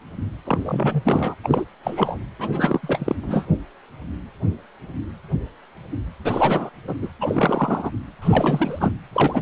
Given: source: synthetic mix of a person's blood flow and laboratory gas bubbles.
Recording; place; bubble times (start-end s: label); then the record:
Doppler ultrasound of blood flow; precordium
0.45-1.02 s: bubbles
1.04-1.34 s: bubbles
1.44-1.65 s: bubbles
1.83-2.17 s: bubbles
2.39-2.80 s: bubbles
2.83-3.16 s: bubbles
3.23-3.46 s: bubbles
6.24-6.70 s: bubbles
6.87-6.95 s: bubbles
7.02-7.08 s: bubbles
7.21-7.91 s: bubbles
8.21-8.91 s: bubbles
9.12-9.42 s: bubbles
From the record:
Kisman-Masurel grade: 332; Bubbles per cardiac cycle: rolling drumbeat, 9 or more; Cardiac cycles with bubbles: 50 to 99%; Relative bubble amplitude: moderate (0.250 to 0.450); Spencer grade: 3 (all of the cardiac periods contain showers or single bubble signals, but not dominating or overriding the cardiac motion signals); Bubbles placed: anywhere in the cardiac cycle